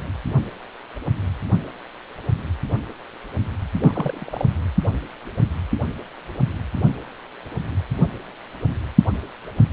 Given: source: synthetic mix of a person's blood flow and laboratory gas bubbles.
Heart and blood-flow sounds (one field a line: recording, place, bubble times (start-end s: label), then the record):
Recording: Doppler ultrasound of blood flow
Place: precordium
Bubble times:
3.80-4.45 s: bubbles
From the record:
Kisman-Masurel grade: 211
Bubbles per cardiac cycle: several, 3 to 8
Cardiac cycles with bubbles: 1 to 10%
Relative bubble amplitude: barely perceptible (0.100 to 0.250)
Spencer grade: 1 (occasional bubble signal discernible with the cardiac motion signal, with majority of cardiac periods free of bubbles)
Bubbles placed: only in the low amplitude regions of the cardiac cycle